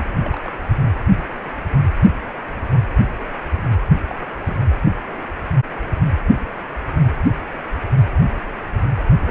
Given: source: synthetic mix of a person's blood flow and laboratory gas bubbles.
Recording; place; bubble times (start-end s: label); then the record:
Doppler ultrasound of blood flow; precordium
0.00-0.05 s: bubbles
0.23-0.43 s: bubbles
0.45-0.51 s: bubbles
3.57-3.65 s: bubbles
4.07-4.18 s: bubbles
4.40-4.57 s: bubbles
9.21-9.31 s: bubbles
From the record:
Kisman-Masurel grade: 121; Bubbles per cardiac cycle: 1 to 2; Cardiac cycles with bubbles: 10 to 50%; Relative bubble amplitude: barely perceptible (0.100 to 0.250); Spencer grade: 2 (many but less than half of the cardiac periods contain bubble signals, singularly or in groups); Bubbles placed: anywhere in the cardiac cycle